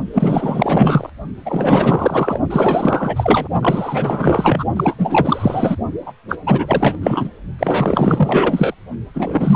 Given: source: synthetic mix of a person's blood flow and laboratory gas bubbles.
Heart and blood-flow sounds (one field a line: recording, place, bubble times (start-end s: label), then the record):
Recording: Doppler ultrasound of blood flow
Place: precordium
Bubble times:
0.14-1.09 s: bubbles
1.45-2.40 s: bubbles
2.50-3.48 s: bubbles
3.61-4.64 s: bubbles
4.76-5.76 s: bubbles
6.05-6.12 s: bubbles
6.29-6.37 s: bubbles
6.46-6.96 s: bubbles
7.01-7.29 s: bubbles
7.59-8.75 s: bubbles
9.13-9.56 s: bubbles
From the record:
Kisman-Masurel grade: 444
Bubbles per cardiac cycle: continuous sound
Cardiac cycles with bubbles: 100%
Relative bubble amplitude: maximal (0.775 to 0.999)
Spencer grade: 4 (maximum detectable bubble signal sounding continuously throughout systole and diastole of every cardiac period, and overriding the amplitude of the normal cardiac signals)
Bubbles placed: only in the low amplitude regions of the cardiac cycle